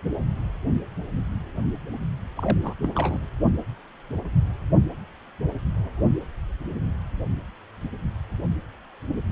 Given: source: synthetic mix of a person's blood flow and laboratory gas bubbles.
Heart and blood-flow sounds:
Doppler ultrasound of blood flow; precordium
2.36-2.73 s: bubbles
2.83-2.89 s: bubbles
2.95-3.26 s: bubbles
From the record:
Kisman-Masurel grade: 211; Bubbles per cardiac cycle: several, 3 to 8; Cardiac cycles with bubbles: 1 to 10%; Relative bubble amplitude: barely perceptible (0.100 to 0.250); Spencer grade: 1 (occasional bubble signal discernible with the cardiac motion signal, with majority of cardiac periods free of bubbles); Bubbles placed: only in the low amplitude regions of the cardiac cycle

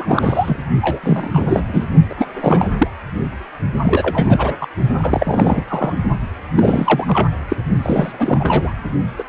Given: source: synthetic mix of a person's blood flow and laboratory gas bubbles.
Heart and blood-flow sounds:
Doppler ultrasound of blood flow; precordium
0.00-0.57 s: bubbles
0.81-1.00 s: bubbles
1.03-1.30 s: bubbles
1.33-1.64 s: bubbles
1.68-1.84 s: bubbles
2.09-2.15 s: bubbles
2.17-2.25 s: bubbles
2.40-2.67 s: bubbles
2.77-2.88 s: bubbles
3.84-4.53 s: bubbles
4.60-4.67 s: bubbles
4.98-5.93 s: bubbles
6.57-7.29 s: bubbles
7.50-7.56 s: bubbles
7.82-8.72 s: bubbles
9.18-9.23 s: bubbles
From the record:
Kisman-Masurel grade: 333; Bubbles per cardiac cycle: rolling drumbeat, 9 or more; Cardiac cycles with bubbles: 50 to 99%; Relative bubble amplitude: loud (0.450 to 0.775); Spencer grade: 3 (all of the cardiac periods contain showers or single bubble signals, but not dominating or overriding the cardiac motion signals); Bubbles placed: only in the low amplitude regions of the cardiac cycle

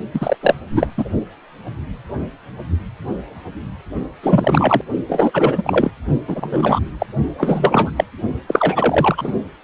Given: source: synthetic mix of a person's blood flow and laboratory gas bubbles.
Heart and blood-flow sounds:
Doppler ultrasound of blood flow; precordium
0.14-0.36 s: bubbles
0.41-0.56 s: bubbles
0.72-0.87 s: bubbles
0.97-1.09 s: bubbles
4.22-4.81 s: bubbles
5.08-5.91 s: bubbles
6.28-6.79 s: bubbles
7.00-7.06 s: bubbles
7.38-7.91 s: bubbles
7.96-8.04 s: bubbles
8.47-9.32 s: bubbles
From the record:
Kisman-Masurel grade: 333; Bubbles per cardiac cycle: rolling drumbeat, 9 or more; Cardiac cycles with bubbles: 50 to 99%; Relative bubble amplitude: loud (0.450 to 0.775); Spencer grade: 3 (all of the cardiac periods contain showers or single bubble signals, but not dominating or overriding the cardiac motion signals); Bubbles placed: only in the low amplitude regions of the cardiac cycle

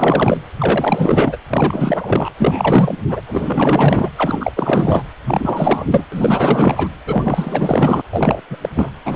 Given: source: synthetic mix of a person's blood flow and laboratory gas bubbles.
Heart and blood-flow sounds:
Doppler ultrasound of blood flow; precordium
0.00-0.39 s: bubbles
0.57-1.38 s: bubbles
1.50-2.29 s: bubbles
2.36-2.97 s: bubbles
3.08-3.20 s: bubbles
3.26-4.10 s: bubbles
4.17-4.52 s: bubbles
4.56-5.04 s: bubbles
5.24-6.04 s: bubbles
6.12-6.88 s: bubbles
7.05-8.02 s: bubbles
8.12-8.41 s: bubbles
8.50-8.58 s: bubbles
8.62-8.69 s: bubbles
8.75-8.90 s: bubbles
9.05-9.16 s: bubbles
From the record:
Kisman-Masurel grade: 444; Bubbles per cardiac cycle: continuous sound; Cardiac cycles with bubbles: 100%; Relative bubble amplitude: maximal (0.775 to 0.999); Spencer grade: 4 (maximum detectable bubble signal sounding continuously throughout systole and diastole of every cardiac period, and overriding the amplitude of the normal cardiac signals); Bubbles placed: anywhere in the cardiac cycle

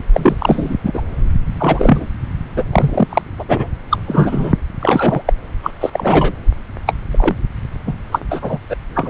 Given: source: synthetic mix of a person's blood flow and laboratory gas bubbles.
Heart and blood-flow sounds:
Doppler ultrasound of blood flow; subclavian vein
0.13-0.74 s: bubbles
0.83-1.02 s: bubbles
1.59-2.05 s: bubbles
2.55-2.64 s: bubbles
2.72-3.06 s: bubbles
3.09-3.22 s: bubbles
3.38-3.44 s: bubbles
3.48-3.67 s: bubbles
3.90-3.98 s: bubbles
4.07-4.55 s: bubbles
4.80-5.23 s: bubbles
5.27-5.33 s: bubbles
5.62-5.71 s: bubbles
5.80-5.90 s: bubbles
5.93-6.32 s: bubbles
6.87-6.94 s: bubbles
7.12-7.35 s: bubbles
7.87-7.95 s: bubbles
8.12-8.20 s: bubbles
8.30-8.59 s: bubbles
8.70-8.76 s: bubbles
8.95-9.10 s: bubbles
From the record:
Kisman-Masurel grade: 243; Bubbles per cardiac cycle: several, 3 to 8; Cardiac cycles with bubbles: 100%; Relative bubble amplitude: loud (0.450 to 0.775); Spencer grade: 3 (all of the cardiac periods contain showers or single bubble signals, but not dominating or overriding the cardiac motion signals); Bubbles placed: anywhere in the cardiac cycle

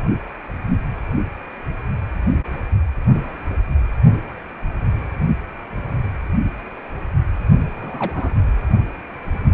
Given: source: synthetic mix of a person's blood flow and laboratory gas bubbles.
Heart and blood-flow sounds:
Doppler ultrasound of blood flow; precordium
7.81-8.34 s: bubbles
From the record:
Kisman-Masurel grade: 211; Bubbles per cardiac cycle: several, 3 to 8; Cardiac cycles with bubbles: 1 to 10%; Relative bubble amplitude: barely perceptible (0.100 to 0.250); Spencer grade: 1 (occasional bubble signal discernible with the cardiac motion signal, with majority of cardiac periods free of bubbles); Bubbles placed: anywhere in the cardiac cycle

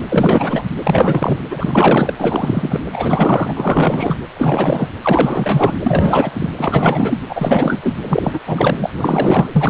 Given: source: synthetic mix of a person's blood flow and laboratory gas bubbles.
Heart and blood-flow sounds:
Doppler ultrasound of blood flow; precordium
0.08-0.63 s: bubbles
0.83-1.38 s: bubbles
1.50-2.13 s: bubbles
2.18-2.86 s: bubbles
2.93-3.54 s: bubbles
3.57-4.16 s: bubbles
4.37-4.89 s: bubbles
5.02-6.50 s: bubbles
6.56-7.20 s: bubbles
7.29-7.94 s: bubbles
8.04-8.40 s: bubbles
8.46-8.90 s: bubbles
8.96-9.49 s: bubbles
9.53-9.70 s: bubbles
From the record:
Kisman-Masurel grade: 444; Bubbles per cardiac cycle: continuous sound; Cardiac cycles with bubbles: 100%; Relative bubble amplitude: maximal (0.775 to 0.999); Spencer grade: 4 (maximum detectable bubble signal sounding continuously throughout systole and diastole of every cardiac period, and overriding the amplitude of the normal cardiac signals); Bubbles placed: anywhere in the cardiac cycle

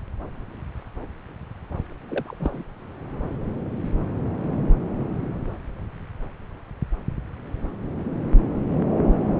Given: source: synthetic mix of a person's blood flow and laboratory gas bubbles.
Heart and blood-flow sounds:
Doppler ultrasound of blood flow; subclavian vein
2.09-2.36 s: bubbles
2.39-2.63 s: bubbles
From the record:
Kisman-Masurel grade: 211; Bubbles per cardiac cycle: several, 3 to 8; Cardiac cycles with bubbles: 1 to 10%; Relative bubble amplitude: barely perceptible (0.100 to 0.250); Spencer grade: 1 (occasional bubble signal discernible with the cardiac motion signal, with majority of cardiac periods free of bubbles); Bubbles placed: anywhere in the cardiac cycle

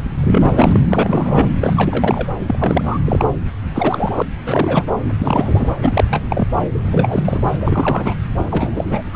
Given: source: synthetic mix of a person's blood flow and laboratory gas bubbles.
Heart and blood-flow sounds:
Doppler ultrasound of blood flow; subclavian vein
0.15-0.80 s: bubbles
0.91-1.49 s: bubbles
1.60-2.27 s: bubbles
2.46-2.98 s: bubbles
3.06-3.26 s: bubbles
3.75-4.22 s: bubbles
4.46-4.86 s: bubbles
5.01-5.14 s: bubbles
5.18-5.76 s: bubbles
5.82-6.21 s: bubbles
6.29-6.46 s: bubbles
6.72-7.50 s: bubbles
7.61-8.15 s: bubbles
8.34-9.02 s: bubbles
9.12-9.16 s: bubbles
From the record:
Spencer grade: 3 (all of the cardiac periods contain showers or single bubble signals, but not dominating or overriding the cardiac motion signals); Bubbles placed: anywhere in the cardiac cycle

